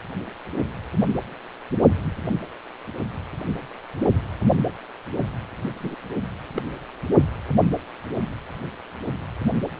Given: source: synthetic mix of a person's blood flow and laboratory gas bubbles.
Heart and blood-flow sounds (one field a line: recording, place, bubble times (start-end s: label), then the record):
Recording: Doppler ultrasound of blood flow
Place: precordium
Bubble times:
5.80-5.95 s: bubbles
6.55-6.62 s: bubbles
From the record:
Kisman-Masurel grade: 121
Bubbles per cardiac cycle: 1 to 2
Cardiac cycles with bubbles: 10 to 50%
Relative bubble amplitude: barely perceptible (0.100 to 0.250)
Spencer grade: 2 (many but less than half of the cardiac periods contain bubble signals, singularly or in groups)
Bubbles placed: only in the low amplitude regions of the cardiac cycle